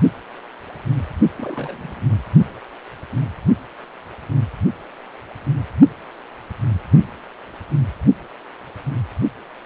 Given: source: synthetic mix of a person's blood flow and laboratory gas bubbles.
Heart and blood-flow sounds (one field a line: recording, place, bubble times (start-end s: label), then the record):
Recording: Doppler ultrasound of blood flow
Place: precordium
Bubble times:
1.39-2.04 s: bubbles
From the record:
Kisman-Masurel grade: 111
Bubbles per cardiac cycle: 1 to 2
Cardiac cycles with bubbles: 1 to 10%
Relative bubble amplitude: barely perceptible (0.100 to 0.250)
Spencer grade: 1 (occasional bubble signal discernible with the cardiac motion signal, with majority of cardiac periods free of bubbles)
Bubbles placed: only in the low amplitude regions of the cardiac cycle